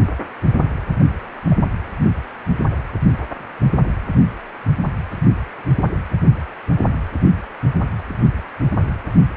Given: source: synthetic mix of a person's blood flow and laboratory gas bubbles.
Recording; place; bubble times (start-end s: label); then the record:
Doppler ultrasound of blood flow; precordium
1.50-1.56 s: bubbles
From the record:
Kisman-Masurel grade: 111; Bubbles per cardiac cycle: 1 to 2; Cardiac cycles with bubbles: 1 to 10%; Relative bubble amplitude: barely perceptible (0.100 to 0.250); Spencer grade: 1 (occasional bubble signal discernible with the cardiac motion signal, with majority of cardiac periods free of bubbles); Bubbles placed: anywhere in the cardiac cycle